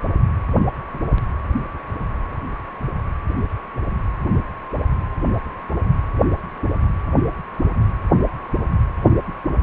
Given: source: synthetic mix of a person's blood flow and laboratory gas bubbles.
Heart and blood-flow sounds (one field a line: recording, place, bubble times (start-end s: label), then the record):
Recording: Doppler ultrasound of blood flow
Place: precordium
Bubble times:
no bubbles
From the record:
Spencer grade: 0 (complete lack of bubble signals)